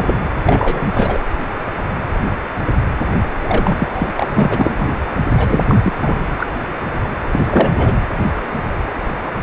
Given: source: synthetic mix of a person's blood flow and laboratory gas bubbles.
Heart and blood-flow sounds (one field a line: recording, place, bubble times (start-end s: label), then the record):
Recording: Doppler ultrasound of blood flow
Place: precordium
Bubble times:
0.00-0.22 s: bubbles
0.43-0.90 s: bubbles
0.94-1.18 s: bubbles
3.42-4.29 s: bubbles
4.35-4.90 s: bubbles
5.37-5.64 s: bubbles
5.68-5.75 s: bubbles
5.82-5.93 s: bubbles
6.02-6.17 s: bubbles
6.37-6.46 s: bubbles
7.31-7.96 s: bubbles
From the record:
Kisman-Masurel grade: 333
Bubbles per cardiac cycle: rolling drumbeat, 9 or more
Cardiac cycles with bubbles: 50 to 99%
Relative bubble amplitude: loud (0.450 to 0.775)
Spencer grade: 3 (all of the cardiac periods contain showers or single bubble signals, but not dominating or overriding the cardiac motion signals)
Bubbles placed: anywhere in the cardiac cycle